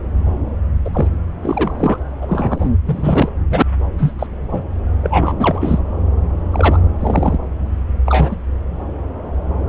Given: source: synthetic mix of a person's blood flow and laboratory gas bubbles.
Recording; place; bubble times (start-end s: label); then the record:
Doppler ultrasound of blood flow; subclavian vein
0.85-1.07 s: bubbles
1.42-1.99 s: bubbles
2.22-2.69 s: bubbles
2.85-3.29 s: bubbles
3.50-3.62 s: bubbles
3.98-4.13 s: bubbles
4.19-4.27 s: bubbles
4.51-4.63 s: bubbles
5.03-5.36 s: bubbles
5.38-5.79 s: bubbles
6.52-6.79 s: bubbles
7.00-7.38 s: bubbles
8.06-8.37 s: bubbles
From the record:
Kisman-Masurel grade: 233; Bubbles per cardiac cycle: several, 3 to 8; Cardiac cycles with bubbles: 50 to 99%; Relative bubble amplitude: loud (0.450 to 0.775); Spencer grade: 3 (all of the cardiac periods contain showers or single bubble signals, but not dominating or overriding the cardiac motion signals); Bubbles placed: anywhere in the cardiac cycle